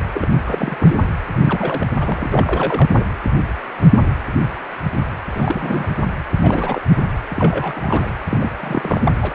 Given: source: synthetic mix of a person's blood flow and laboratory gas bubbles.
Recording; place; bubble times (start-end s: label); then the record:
Doppler ultrasound of blood flow; precordium
0.14-0.27 s: bubbles
0.46-0.98 s: bubbles
1.44-1.91 s: bubbles
1.99-3.08 s: bubbles
5.33-6.05 s: bubbles
6.42-6.82 s: bubbles
6.89-7.00 s: bubbles
7.29-7.73 s: bubbles
7.76-8.10 s: bubbles
8.28-8.49 s: bubbles
8.60-9.12 s: bubbles
9.19-9.33 s: bubbles
From the record:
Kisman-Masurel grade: 332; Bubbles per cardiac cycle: rolling drumbeat, 9 or more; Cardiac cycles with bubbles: 50 to 99%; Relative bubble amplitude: moderate (0.250 to 0.450); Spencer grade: 3 (all of the cardiac periods contain showers or single bubble signals, but not dominating or overriding the cardiac motion signals); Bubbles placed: anywhere in the cardiac cycle